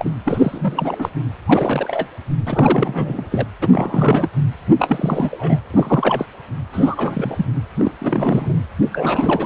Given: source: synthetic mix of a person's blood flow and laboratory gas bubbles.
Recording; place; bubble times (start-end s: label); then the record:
Doppler ultrasound of blood flow; precordium
0.00-0.13 s: bubbles
0.26-1.09 s: bubbles
1.46-2.06 s: bubbles
2.46-3.28 s: bubbles
3.30-3.46 s: bubbles
3.61-3.68 s: bubbles
3.71-4.29 s: bubbles
4.79-5.59 s: bubbles
5.71-6.26 s: bubbles
6.73-7.46 s: bubbles
7.78-7.92 s: bubbles
8.00-8.58 s: bubbles
8.93-9.46 s: bubbles
From the record:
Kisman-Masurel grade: 342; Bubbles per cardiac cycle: rolling drumbeat, 9 or more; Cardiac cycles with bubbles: 100%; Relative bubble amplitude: moderate (0.250 to 0.450); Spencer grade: 3 (all of the cardiac periods contain showers or single bubble signals, but not dominating or overriding the cardiac motion signals); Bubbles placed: anywhere in the cardiac cycle